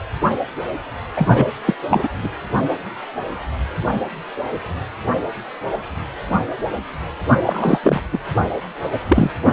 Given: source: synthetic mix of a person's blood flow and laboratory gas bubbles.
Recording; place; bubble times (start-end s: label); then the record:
Doppler ultrasound of blood flow; precordium
1.16-1.27 s: bubbles
1.31-1.48 s: bubbles
1.66-1.74 s: bubbles
1.89-2.08 s: bubbles
2.23-2.29 s: bubbles
7.46-7.79 s: bubbles
7.83-8.01 s: bubbles
8.12-8.19 s: bubbles
8.83-8.89 s: bubbles
9.08-9.30 s: bubbles
From the record:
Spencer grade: 2 (many but less than half of the cardiac periods contain bubble signals, singularly or in groups); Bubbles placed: anywhere in the cardiac cycle